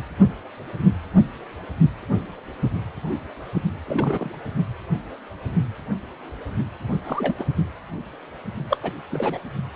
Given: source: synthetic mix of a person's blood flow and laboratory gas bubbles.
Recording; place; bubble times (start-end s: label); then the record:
Doppler ultrasound of blood flow; precordium
3.54-3.62 s: bubbles
3.87-4.30 s: bubbles
7.04-7.46 s: bubbles
8.70-8.77 s: bubbles
8.83-8.92 s: bubbles
9.12-9.39 s: bubbles
From the record:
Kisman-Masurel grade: 221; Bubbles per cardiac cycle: several, 3 to 8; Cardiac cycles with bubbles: 10 to 50%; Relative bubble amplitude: barely perceptible (0.100 to 0.250); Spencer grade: 2 (many but less than half of the cardiac periods contain bubble signals, singularly or in groups); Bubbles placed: only in the low amplitude regions of the cardiac cycle